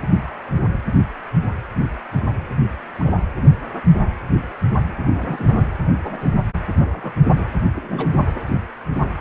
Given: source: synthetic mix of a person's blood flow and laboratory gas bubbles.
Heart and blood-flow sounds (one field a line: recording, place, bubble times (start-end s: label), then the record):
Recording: Doppler ultrasound of blood flow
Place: precordium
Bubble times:
2.99-3.22 s: bubbles
5.21-5.67 s: bubbles
6.03-6.26 s: bubbles
6.81-7.13 s: bubbles
7.35-7.45 s: bubbles
7.75-8.09 s: bubbles
From the record:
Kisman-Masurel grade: 122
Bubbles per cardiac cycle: 1 to 2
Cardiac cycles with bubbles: 10 to 50%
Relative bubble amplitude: moderate (0.250 to 0.450)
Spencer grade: 2 (many but less than half of the cardiac periods contain bubble signals, singularly or in groups)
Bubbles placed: anywhere in the cardiac cycle